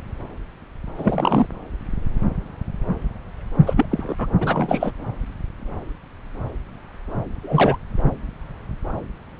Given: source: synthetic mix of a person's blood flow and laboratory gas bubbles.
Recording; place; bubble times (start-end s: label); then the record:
Doppler ultrasound of blood flow; subclavian vein
0.97-1.47 s: bubbles
3.66-3.86 s: bubbles
3.91-4.16 s: bubbles
4.18-4.28 s: bubbles
4.40-4.91 s: bubbles
7.43-7.76 s: bubbles
From the record:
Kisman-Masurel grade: 223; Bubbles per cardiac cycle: several, 3 to 8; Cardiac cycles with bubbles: 10 to 50%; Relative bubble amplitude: loud (0.450 to 0.775); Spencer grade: 2 (many but less than half of the cardiac periods contain bubble signals, singularly or in groups); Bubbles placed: anywhere in the cardiac cycle